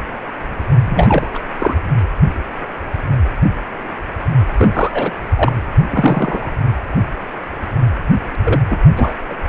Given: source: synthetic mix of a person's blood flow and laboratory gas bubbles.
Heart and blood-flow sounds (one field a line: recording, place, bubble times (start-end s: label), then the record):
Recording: Doppler ultrasound of blood flow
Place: precordium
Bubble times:
0.85-1.28 s: bubbles
1.34-1.39 s: bubbles
1.58-1.74 s: bubbles
4.58-4.92 s: bubbles
4.94-5.12 s: bubbles
5.37-5.52 s: bubbles
5.90-6.51 s: bubbles
8.44-8.62 s: bubbles
8.70-8.77 s: bubbles
8.96-9.13 s: bubbles
9.29-9.35 s: bubbles
From the record:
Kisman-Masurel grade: 223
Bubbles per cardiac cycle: several, 3 to 8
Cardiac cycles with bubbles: 10 to 50%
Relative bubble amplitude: loud (0.450 to 0.775)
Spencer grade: 2 (many but less than half of the cardiac periods contain bubble signals, singularly or in groups)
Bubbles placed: anywhere in the cardiac cycle